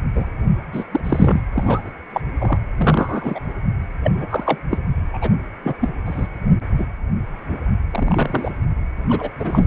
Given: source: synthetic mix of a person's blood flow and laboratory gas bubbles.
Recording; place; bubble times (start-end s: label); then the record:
Doppler ultrasound of blood flow; precordium
0.13-0.31 s: bubbles
0.72-0.84 s: bubbles
0.91-1.01 s: bubbles
1.04-1.46 s: bubbles
1.54-1.92 s: bubbles
2.13-2.21 s: bubbles
2.39-2.58 s: bubbles
2.77-3.40 s: bubbles
4.03-4.11 s: bubbles
4.17-4.26 s: bubbles
4.29-4.59 s: bubbles
4.70-4.78 s: bubbles
5.13-5.30 s: bubbles
5.63-5.74 s: bubbles
5.80-5.90 s: bubbles
6.05-6.27 s: bubbles
6.78-6.85 s: bubbles
7.48-7.58 s: bubbles
7.90-8.51 s: bubbles
9.08-9.29 s: bubbles
9.39-9.67 s: bubbles
From the record:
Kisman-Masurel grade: 233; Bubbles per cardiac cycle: several, 3 to 8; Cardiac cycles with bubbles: 50 to 99%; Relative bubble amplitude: loud (0.450 to 0.775); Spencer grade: 3 (all of the cardiac periods contain showers or single bubble signals, but not dominating or overriding the cardiac motion signals); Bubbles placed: anywhere in the cardiac cycle